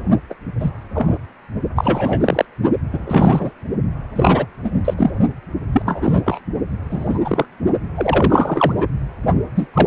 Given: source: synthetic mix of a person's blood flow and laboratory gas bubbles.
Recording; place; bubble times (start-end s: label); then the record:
Doppler ultrasound of blood flow; precordium
0.30-0.34 s: bubbles
0.60-0.71 s: bubbles
0.94-1.18 s: bubbles
1.75-2.45 s: bubbles
2.92-3.52 s: bubbles
4.16-4.46 s: bubbles
4.63-4.71 s: bubbles
4.84-4.94 s: bubbles
4.98-5.11 s: bubbles
5.72-5.82 s: bubbles
5.86-6.41 s: bubbles
6.90-7.20 s: bubbles
7.25-7.45 s: bubbles
7.95-8.73 s: bubbles
8.77-8.86 s: bubbles
9.55-9.67 s: bubbles
9.73-9.87 s: bubbles
From the record:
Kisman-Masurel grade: 243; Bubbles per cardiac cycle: several, 3 to 8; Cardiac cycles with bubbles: 100%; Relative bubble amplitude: loud (0.450 to 0.775); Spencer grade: 3 (all of the cardiac periods contain showers or single bubble signals, but not dominating or overriding the cardiac motion signals); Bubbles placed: only in the low amplitude regions of the cardiac cycle